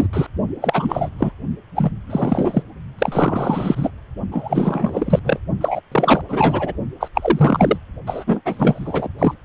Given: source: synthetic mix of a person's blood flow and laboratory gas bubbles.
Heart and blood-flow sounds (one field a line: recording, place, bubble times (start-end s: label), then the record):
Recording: Doppler ultrasound of blood flow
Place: precordium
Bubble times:
0.00-0.07 s: bubbles
0.13-0.27 s: bubbles
0.61-1.09 s: bubbles
1.18-1.32 s: bubbles
1.76-1.91 s: bubbles
2.07-2.62 s: bubbles
2.99-3.90 s: bubbles
4.31-5.19 s: bubbles
5.24-5.40 s: bubbles
5.60-5.80 s: bubbles
5.92-6.21 s: bubbles
6.29-6.73 s: bubbles
7.00-7.08 s: bubbles
7.14-7.78 s: bubbles
8.06-8.24 s: bubbles
8.27-8.41 s: bubbles
8.45-9.08 s: bubbles
9.18-9.34 s: bubbles
From the record:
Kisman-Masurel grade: 343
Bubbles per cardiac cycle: rolling drumbeat, 9 or more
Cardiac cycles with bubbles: 100%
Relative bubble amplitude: loud (0.450 to 0.775)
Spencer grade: 3 (all of the cardiac periods contain showers or single bubble signals, but not dominating or overriding the cardiac motion signals)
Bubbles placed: only in the low amplitude regions of the cardiac cycle